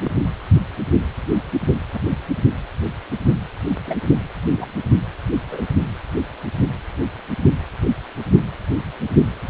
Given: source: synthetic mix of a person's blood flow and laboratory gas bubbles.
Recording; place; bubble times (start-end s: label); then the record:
Doppler ultrasound of blood flow; precordium
0.04-0.11 s: bubbles
1.93-1.99 s: bubbles
3.87-3.96 s: bubbles
4.56-4.71 s: bubbles
5.51-5.62 s: bubbles
From the record:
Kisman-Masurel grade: 121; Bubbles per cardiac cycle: 1 to 2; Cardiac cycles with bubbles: 10 to 50%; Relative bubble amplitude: barely perceptible (0.100 to 0.250); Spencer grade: 2 (many but less than half of the cardiac periods contain bubble signals, singularly or in groups); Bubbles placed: only in the low amplitude regions of the cardiac cycle